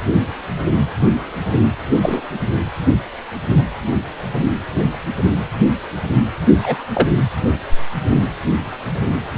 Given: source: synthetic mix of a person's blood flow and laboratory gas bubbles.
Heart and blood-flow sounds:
Doppler ultrasound of blood flow; precordium
1.93-2.22 s: bubbles
6.62-6.83 s: bubbles
6.93-7.09 s: bubbles
From the record:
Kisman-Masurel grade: 123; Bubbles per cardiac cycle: 1 to 2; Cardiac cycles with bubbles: 10 to 50%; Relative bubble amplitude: loud (0.450 to 0.775); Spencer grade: 2 (many but less than half of the cardiac periods contain bubble signals, singularly or in groups); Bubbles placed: anywhere in the cardiac cycle

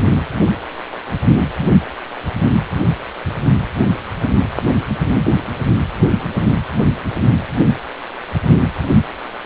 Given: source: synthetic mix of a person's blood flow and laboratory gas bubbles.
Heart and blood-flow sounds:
Doppler ultrasound of blood flow; precordium
no bubbles
From the record:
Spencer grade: 0 (complete lack of bubble signals)

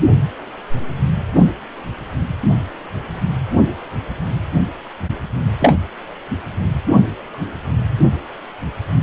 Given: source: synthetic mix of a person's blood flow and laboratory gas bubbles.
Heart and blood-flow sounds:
Doppler ultrasound of blood flow; precordium
5.60-5.75 s: bubbles
From the record:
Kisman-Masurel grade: 113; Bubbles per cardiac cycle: 1 to 2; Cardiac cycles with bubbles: 1 to 10%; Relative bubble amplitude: loud (0.450 to 0.775); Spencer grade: 1 (occasional bubble signal discernible with the cardiac motion signal, with majority of cardiac periods free of bubbles); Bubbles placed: anywhere in the cardiac cycle

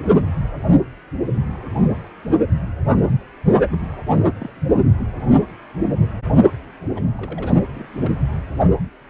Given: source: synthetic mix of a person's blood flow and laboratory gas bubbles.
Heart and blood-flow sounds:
Doppler ultrasound of blood flow; precordium
3.72-3.76 s: bubbles
4.08-4.25 s: bubbles
4.28-4.64 s: bubbles
6.96-7.02 s: bubbles
7.15-7.59 s: bubbles
7.74-7.87 s: bubbles
8.04-8.21 s: bubbles
From the record:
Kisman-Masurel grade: 221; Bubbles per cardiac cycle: several, 3 to 8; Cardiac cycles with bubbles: 10 to 50%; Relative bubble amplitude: barely perceptible (0.100 to 0.250); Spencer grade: 2 (many but less than half of the cardiac periods contain bubble signals, singularly or in groups); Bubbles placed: only in the low amplitude regions of the cardiac cycle

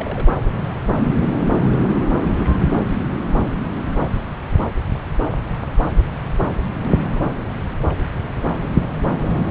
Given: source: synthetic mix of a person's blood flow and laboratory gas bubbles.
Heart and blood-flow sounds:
Doppler ultrasound of blood flow; subclavian vein
0.00-0.27 s: bubbles
0.30-0.35 s: bubbles
From the record:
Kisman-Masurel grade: 211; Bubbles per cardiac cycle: several, 3 to 8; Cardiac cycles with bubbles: 1 to 10%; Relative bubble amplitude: barely perceptible (0.100 to 0.250); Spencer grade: 1 (occasional bubble signal discernible with the cardiac motion signal, with majority of cardiac periods free of bubbles); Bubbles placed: anywhere in the cardiac cycle

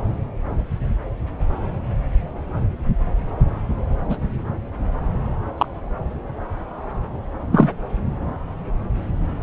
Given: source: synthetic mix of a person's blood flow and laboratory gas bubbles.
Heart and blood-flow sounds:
Doppler ultrasound of blood flow; subclavian vein
4.09-4.17 s: bubbles
5.58-5.66 s: bubbles
7.52-7.71 s: bubbles
From the record:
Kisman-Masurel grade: 123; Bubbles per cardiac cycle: 1 to 2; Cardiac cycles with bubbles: 10 to 50%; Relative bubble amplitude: loud (0.450 to 0.775); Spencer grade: 2 (many but less than half of the cardiac periods contain bubble signals, singularly or in groups); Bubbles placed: anywhere in the cardiac cycle

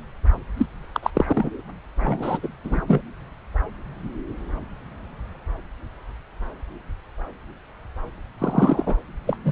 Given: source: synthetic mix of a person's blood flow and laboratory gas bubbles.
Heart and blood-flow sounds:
Doppler ultrasound of blood flow; subclavian vein
0.56-0.66 s: bubbles
0.93-1.00 s: bubbles
1.02-1.10 s: bubbles
1.15-1.25 s: bubbles
1.28-1.49 s: bubbles
2.00-2.38 s: bubbles
2.43-2.48 s: bubbles
2.64-2.82 s: bubbles
2.87-3.01 s: bubbles
8.38-8.96 s: bubbles
9.26-9.37 s: bubbles
9.45-9.52 s: bubbles
From the record:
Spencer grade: 2 (many but less than half of the cardiac periods contain bubble signals, singularly or in groups); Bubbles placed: anywhere in the cardiac cycle

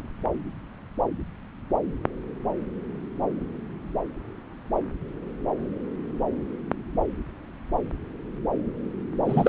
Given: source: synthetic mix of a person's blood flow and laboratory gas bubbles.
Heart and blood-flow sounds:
Doppler ultrasound of blood flow; subclavian vein
9.25-9.49 s: bubbles
From the record:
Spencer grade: 1 (occasional bubble signal discernible with the cardiac motion signal, with majority of cardiac periods free of bubbles); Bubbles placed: anywhere in the cardiac cycle

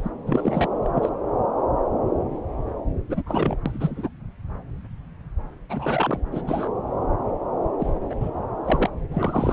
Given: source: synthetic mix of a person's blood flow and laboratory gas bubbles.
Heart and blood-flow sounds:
Doppler ultrasound of blood flow; subclavian vein
0.00-0.09 s: bubbles
0.26-0.67 s: bubbles
0.82-0.90 s: bubbles
0.94-1.09 s: bubbles
3.09-3.23 s: bubbles
3.26-3.57 s: bubbles
3.66-4.08 s: bubbles
5.69-6.19 s: bubbles
6.31-6.42 s: bubbles
6.47-6.70 s: bubbles
7.79-7.93 s: bubbles
8.10-8.16 s: bubbles
8.20-8.31 s: bubbles
8.64-8.90 s: bubbles
9.11-9.53 s: bubbles
From the record:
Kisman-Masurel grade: 222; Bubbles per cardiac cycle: several, 3 to 8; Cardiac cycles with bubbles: 10 to 50%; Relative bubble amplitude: moderate (0.250 to 0.450); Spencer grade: 2 (many but less than half of the cardiac periods contain bubble signals, singularly or in groups); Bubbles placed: anywhere in the cardiac cycle

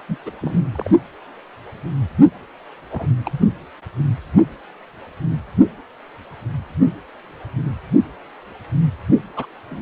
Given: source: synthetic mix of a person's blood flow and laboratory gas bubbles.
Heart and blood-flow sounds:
Doppler ultrasound of blood flow; precordium
0.08-0.17 s: bubbles
0.26-0.31 s: bubbles
0.42-0.64 s: bubbles
0.72-0.90 s: bubbles
2.91-3.08 s: bubbles
3.25-3.41 s: bubbles
9.36-9.46 s: bubbles
9.70-9.82 s: bubbles
From the record:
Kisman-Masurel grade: 221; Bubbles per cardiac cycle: several, 3 to 8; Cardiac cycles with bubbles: 10 to 50%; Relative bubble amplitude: barely perceptible (0.100 to 0.250); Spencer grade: 2 (many but less than half of the cardiac periods contain bubble signals, singularly or in groups); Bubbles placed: only in the low amplitude regions of the cardiac cycle

